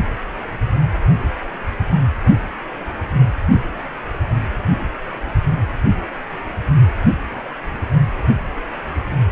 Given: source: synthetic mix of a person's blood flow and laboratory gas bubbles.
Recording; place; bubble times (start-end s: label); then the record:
Doppler ultrasound of blood flow; precordium
no bubbles
From the record:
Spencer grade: 0 (complete lack of bubble signals)